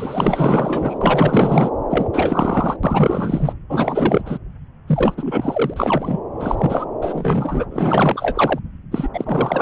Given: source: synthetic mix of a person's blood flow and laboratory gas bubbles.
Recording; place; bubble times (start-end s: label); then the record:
Doppler ultrasound of blood flow; subclavian vein
0.00-0.98 s: bubbles
1.01-1.71 s: bubbles
1.90-2.09 s: bubbles
2.13-2.76 s: bubbles
2.83-3.53 s: bubbles
3.69-4.38 s: bubbles
4.87-5.15 s: bubbles
5.17-6.20 s: bubbles
6.40-6.86 s: bubbles
7.02-7.65 s: bubbles
7.70-8.59 s: bubbles
8.91-9.08 s: bubbles
9.13-9.62 s: bubbles
From the record:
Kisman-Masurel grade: 444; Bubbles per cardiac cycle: continuous sound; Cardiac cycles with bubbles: 100%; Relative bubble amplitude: maximal (0.775 to 0.999); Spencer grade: 4 (maximum detectable bubble signal sounding continuously throughout systole and diastole of every cardiac period, and overriding the amplitude of the normal cardiac signals); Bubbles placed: anywhere in the cardiac cycle